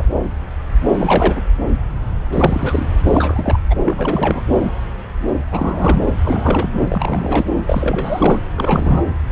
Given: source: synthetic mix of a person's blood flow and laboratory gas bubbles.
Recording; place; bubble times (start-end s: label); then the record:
Doppler ultrasound of blood flow; subclavian vein
0.00-0.05 s: bubbles
0.98-1.42 s: bubbles
2.31-2.89 s: bubbles
3.04-3.60 s: bubbles
3.70-3.76 s: bubbles
3.85-4.43 s: bubbles
5.51-6.04 s: bubbles
6.23-6.69 s: bubbles
6.72-7.46 s: bubbles
7.67-8.39 s: bubbles
8.56-9.02 s: bubbles
From the record:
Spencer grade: 3 (all of the cardiac periods contain showers or single bubble signals, but not dominating or overriding the cardiac motion signals); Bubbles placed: anywhere in the cardiac cycle